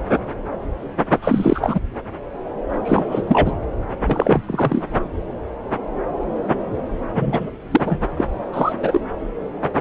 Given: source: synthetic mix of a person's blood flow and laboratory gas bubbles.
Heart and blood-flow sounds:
Doppler ultrasound of blood flow; subclavian vein
1.12-1.79 s: bubbles
2.84-3.05 s: bubbles
3.11-3.23 s: bubbles
3.27-3.55 s: bubbles
4.06-4.40 s: bubbles
4.46-4.85 s: bubbles
7.15-7.51 s: bubbles
7.71-7.81 s: bubbles
7.85-8.01 s: bubbles
8.16-8.25 s: bubbles
8.53-8.72 s: bubbles
8.82-9.00 s: bubbles
From the record:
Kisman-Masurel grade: 223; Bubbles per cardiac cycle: several, 3 to 8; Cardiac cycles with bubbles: 10 to 50%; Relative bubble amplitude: loud (0.450 to 0.775); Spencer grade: 2 (many but less than half of the cardiac periods contain bubble signals, singularly or in groups); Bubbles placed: anywhere in the cardiac cycle

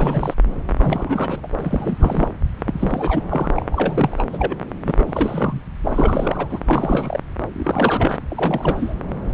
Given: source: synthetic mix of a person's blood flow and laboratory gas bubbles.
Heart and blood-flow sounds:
Doppler ultrasound of blood flow; subclavian vein
0.00-0.34 s: bubbles
0.77-1.48 s: bubbles
1.58-2.27 s: bubbles
2.56-3.23 s: bubbles
3.29-3.50 s: bubbles
3.56-3.66 s: bubbles
3.72-4.24 s: bubbles
4.33-4.55 s: bubbles
4.84-5.04 s: bubbles
5.06-5.62 s: bubbles
5.84-6.59 s: bubbles
6.66-7.20 s: bubbles
7.53-8.19 s: bubbles
8.30-8.94 s: bubbles
From the record:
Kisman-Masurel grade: 342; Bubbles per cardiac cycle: rolling drumbeat, 9 or more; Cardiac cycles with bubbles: 100%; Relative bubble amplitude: moderate (0.250 to 0.450); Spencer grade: 3 (all of the cardiac periods contain showers or single bubble signals, but not dominating or overriding the cardiac motion signals); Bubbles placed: anywhere in the cardiac cycle

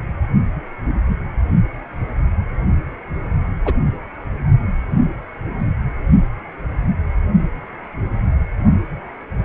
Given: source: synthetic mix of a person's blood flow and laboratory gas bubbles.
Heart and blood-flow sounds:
Doppler ultrasound of blood flow; precordium
3.65-3.73 s: bubbles
From the record:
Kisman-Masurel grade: 112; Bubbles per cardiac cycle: 1 to 2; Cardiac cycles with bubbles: 1 to 10%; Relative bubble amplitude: moderate (0.250 to 0.450); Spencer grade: 1 (occasional bubble signal discernible with the cardiac motion signal, with majority of cardiac periods free of bubbles); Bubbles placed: only in the low amplitude regions of the cardiac cycle

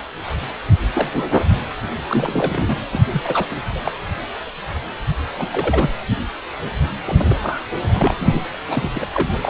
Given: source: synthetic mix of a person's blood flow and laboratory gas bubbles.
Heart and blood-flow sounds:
Doppler ultrasound of blood flow; precordium
0.68-0.75 s: bubbles
0.94-1.35 s: bubbles
2.08-2.79 s: bubbles
2.92-3.00 s: bubbles
3.12-3.22 s: bubbles
3.25-3.48 s: bubbles
3.51-3.62 s: bubbles
3.75-3.81 s: bubbles
3.85-3.92 s: bubbles
5.37-5.47 s: bubbles
5.50-5.90 s: bubbles
7.05-7.36 s: bubbles
7.42-7.59 s: bubbles
7.91-8.15 s: bubbles
8.18-8.40 s: bubbles
8.62-8.89 s: bubbles
8.95-9.07 s: bubbles
9.12-9.29 s: bubbles
9.41-9.50 s: bubbles
From the record:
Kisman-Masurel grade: 232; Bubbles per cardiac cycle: several, 3 to 8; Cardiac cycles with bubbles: 50 to 99%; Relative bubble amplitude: moderate (0.250 to 0.450); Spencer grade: 3 (all of the cardiac periods contain showers or single bubble signals, but not dominating or overriding the cardiac motion signals); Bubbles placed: anywhere in the cardiac cycle

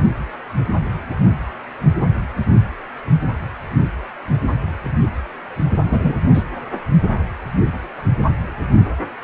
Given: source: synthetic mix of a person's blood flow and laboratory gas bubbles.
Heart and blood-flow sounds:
Doppler ultrasound of blood flow; precordium
5.91-6.14 s: bubbles
6.34-6.43 s: bubbles
From the record:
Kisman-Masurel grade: 113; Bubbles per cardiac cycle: 1 to 2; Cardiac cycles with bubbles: 1 to 10%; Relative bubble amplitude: loud (0.450 to 0.775); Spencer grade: 1 (occasional bubble signal discernible with the cardiac motion signal, with majority of cardiac periods free of bubbles); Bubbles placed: anywhere in the cardiac cycle

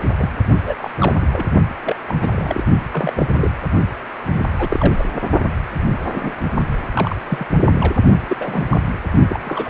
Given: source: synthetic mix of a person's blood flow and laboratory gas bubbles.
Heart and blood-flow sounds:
Doppler ultrasound of blood flow; precordium
0.18-0.30 s: bubbles
0.66-0.74 s: bubbles
0.81-0.92 s: bubbles
0.98-1.27 s: bubbles
1.31-1.47 s: bubbles
1.84-1.96 s: bubbles
2.08-2.62 s: bubbles
2.93-3.13 s: bubbles
3.16-3.26 s: bubbles
3.32-3.50 s: bubbles
4.33-4.42 s: bubbles
4.58-4.95 s: bubbles
4.98-5.04 s: bubbles
6.04-6.31 s: bubbles
6.94-7.16 s: bubbles
7.27-7.46 s: bubbles
7.71-7.93 s: bubbles
8.28-8.37 s: bubbles
8.39-8.63 s: bubbles
8.69-8.79 s: bubbles
9.28-9.38 s: bubbles
9.45-9.70 s: bubbles
From the record:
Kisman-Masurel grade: 242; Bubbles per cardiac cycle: several, 3 to 8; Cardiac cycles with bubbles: 100%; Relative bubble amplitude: moderate (0.250 to 0.450); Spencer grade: 3 (all of the cardiac periods contain showers or single bubble signals, but not dominating or overriding the cardiac motion signals); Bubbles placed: only in the low amplitude regions of the cardiac cycle

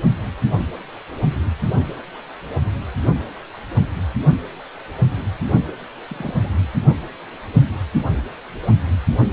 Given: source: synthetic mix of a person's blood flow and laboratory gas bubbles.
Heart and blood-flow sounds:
Doppler ultrasound of blood flow; precordium
1.98-2.02 s: bubbles
6.08-6.51 s: bubbles
From the record:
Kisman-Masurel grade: 121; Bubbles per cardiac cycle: 1 to 2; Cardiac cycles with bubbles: 10 to 50%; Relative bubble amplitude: barely perceptible (0.100 to 0.250); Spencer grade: 2 (many but less than half of the cardiac periods contain bubble signals, singularly or in groups); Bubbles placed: anywhere in the cardiac cycle

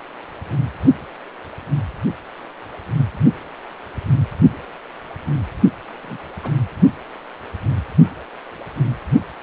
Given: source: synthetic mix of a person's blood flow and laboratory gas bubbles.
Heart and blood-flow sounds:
Doppler ultrasound of blood flow; precordium
6.03-6.17 s: bubbles
6.43-6.50 s: bubbles
From the record:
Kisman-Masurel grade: 111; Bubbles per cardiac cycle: 1 to 2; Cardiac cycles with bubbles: 1 to 10%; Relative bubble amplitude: barely perceptible (0.100 to 0.250); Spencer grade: 1 (occasional bubble signal discernible with the cardiac motion signal, with majority of cardiac periods free of bubbles); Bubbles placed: only in the low amplitude regions of the cardiac cycle

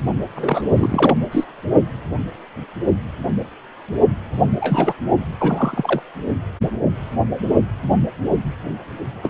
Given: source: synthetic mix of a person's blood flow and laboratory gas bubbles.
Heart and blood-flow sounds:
Doppler ultrasound of blood flow; precordium
0.36-0.68 s: bubbles
0.76-1.15 s: bubbles
1.31-1.46 s: bubbles
4.56-4.94 s: bubbles
5.38-6.01 s: bubbles
9.22-9.30 s: bubbles
From the record:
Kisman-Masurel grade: 233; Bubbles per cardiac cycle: several, 3 to 8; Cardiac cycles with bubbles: 50 to 99%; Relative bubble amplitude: loud (0.450 to 0.775); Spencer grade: 3 (all of the cardiac periods contain showers or single bubble signals, but not dominating or overriding the cardiac motion signals); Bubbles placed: only in the low amplitude regions of the cardiac cycle

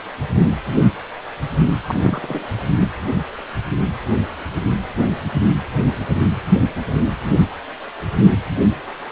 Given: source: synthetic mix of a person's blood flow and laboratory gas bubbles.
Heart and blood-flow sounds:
Doppler ultrasound of blood flow; precordium
1.88-2.46 s: bubbles
2.79-2.92 s: bubbles
From the record:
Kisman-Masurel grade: 222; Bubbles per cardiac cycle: several, 3 to 8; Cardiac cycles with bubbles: 10 to 50%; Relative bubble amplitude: moderate (0.250 to 0.450); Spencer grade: 2 (many but less than half of the cardiac periods contain bubble signals, singularly or in groups); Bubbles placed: anywhere in the cardiac cycle

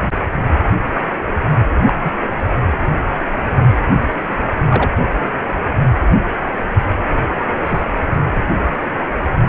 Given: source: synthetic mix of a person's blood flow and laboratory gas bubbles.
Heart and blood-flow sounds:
Doppler ultrasound of blood flow; precordium
1.87-1.93 s: bubbles
2.04-2.11 s: bubbles
4.69-4.91 s: bubbles
7.66-7.83 s: bubbles
From the record:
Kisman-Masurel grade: 122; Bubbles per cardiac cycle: 1 to 2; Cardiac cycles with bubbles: 10 to 50%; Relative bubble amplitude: moderate (0.250 to 0.450); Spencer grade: 2 (many but less than half of the cardiac periods contain bubble signals, singularly or in groups); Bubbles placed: anywhere in the cardiac cycle

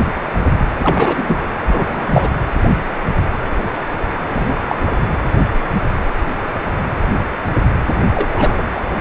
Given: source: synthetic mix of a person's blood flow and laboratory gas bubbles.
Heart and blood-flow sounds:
Doppler ultrasound of blood flow; precordium
0.78-1.43 s: bubbles
1.67-2.29 s: bubbles
4.29-4.56 s: bubbles
4.67-4.75 s: bubbles
4.80-4.96 s: bubbles
8.14-8.62 s: bubbles
8.71-8.85 s: bubbles
From the record:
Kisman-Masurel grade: 222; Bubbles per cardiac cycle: several, 3 to 8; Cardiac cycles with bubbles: 10 to 50%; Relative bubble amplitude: moderate (0.250 to 0.450); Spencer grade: 2 (many but less than half of the cardiac periods contain bubble signals, singularly or in groups); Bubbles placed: anywhere in the cardiac cycle

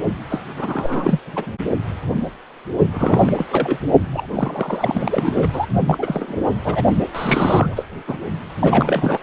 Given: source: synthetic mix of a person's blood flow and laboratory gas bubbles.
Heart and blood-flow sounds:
Doppler ultrasound of blood flow; precordium
0.29-0.42 s: bubbles
0.56-1.21 s: bubbles
1.27-1.51 s: bubbles
2.93-3.33 s: bubbles
3.36-3.46 s: bubbles
3.51-3.78 s: bubbles
4.13-4.26 s: bubbles
4.33-5.48 s: bubbles
5.52-5.66 s: bubbles
5.87-6.36 s: bubbles
6.64-6.83 s: bubbles
7.14-7.86 s: bubbles
8.07-8.17 s: bubbles
8.58-9.19 s: bubbles
From the record:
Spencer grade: 3 (all of the cardiac periods contain showers or single bubble signals, but not dominating or overriding the cardiac motion signals); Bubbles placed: only in the low amplitude regions of the cardiac cycle

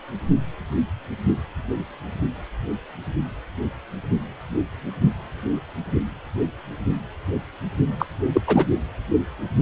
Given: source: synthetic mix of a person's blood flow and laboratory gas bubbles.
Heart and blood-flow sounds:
Doppler ultrasound of blood flow; precordium
7.99-8.06 s: bubbles
8.32-8.41 s: bubbles
8.46-8.66 s: bubbles
From the record:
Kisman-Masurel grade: 223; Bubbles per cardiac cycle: several, 3 to 8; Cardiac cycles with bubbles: 10 to 50%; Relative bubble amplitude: loud (0.450 to 0.775); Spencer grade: 2 (many but less than half of the cardiac periods contain bubble signals, singularly or in groups); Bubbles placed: only in the low amplitude regions of the cardiac cycle

